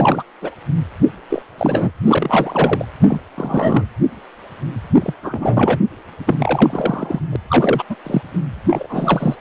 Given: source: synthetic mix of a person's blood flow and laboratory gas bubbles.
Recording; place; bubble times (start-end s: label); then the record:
Doppler ultrasound of blood flow; precordium
0.00-0.23 s: bubbles
0.41-0.50 s: bubbles
1.29-1.42 s: bubbles
1.58-1.90 s: bubbles
2.04-2.86 s: bubbles
3.00-3.19 s: bubbles
3.34-3.85 s: bubbles
4.94-5.14 s: bubbles
5.23-5.78 s: bubbles
6.27-7.20 s: bubbles
7.32-7.36 s: bubbles
7.49-7.83 s: bubbles
7.90-7.96 s: bubbles
8.04-8.21 s: bubbles
8.70-9.35 s: bubbles
From the record:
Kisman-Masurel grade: 332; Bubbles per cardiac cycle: rolling drumbeat, 9 or more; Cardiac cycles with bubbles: 50 to 99%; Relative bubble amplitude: moderate (0.250 to 0.450); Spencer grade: 3 (all of the cardiac periods contain showers or single bubble signals, but not dominating or overriding the cardiac motion signals); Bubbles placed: anywhere in the cardiac cycle